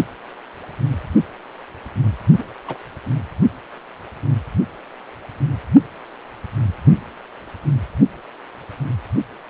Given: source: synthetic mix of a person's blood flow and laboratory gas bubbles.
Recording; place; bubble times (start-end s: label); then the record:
Doppler ultrasound of blood flow; precordium
2.37-2.44 s: bubbles
2.67-2.78 s: bubbles
From the record:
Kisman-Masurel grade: 121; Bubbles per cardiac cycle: 1 to 2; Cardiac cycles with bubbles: 10 to 50%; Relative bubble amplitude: barely perceptible (0.100 to 0.250); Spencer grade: 2 (many but less than half of the cardiac periods contain bubble signals, singularly or in groups); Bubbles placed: only in the low amplitude regions of the cardiac cycle